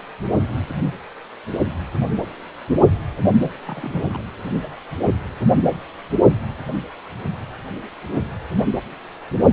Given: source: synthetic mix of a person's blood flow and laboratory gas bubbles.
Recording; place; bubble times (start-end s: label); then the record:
Doppler ultrasound of blood flow; precordium
3.42-3.50 s: bubbles
3.65-4.04 s: bubbles
4.09-4.24 s: bubbles
From the record:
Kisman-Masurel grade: 211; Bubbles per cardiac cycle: several, 3 to 8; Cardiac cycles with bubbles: 1 to 10%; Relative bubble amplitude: barely perceptible (0.100 to 0.250); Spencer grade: 1 (occasional bubble signal discernible with the cardiac motion signal, with majority of cardiac periods free of bubbles); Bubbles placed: anywhere in the cardiac cycle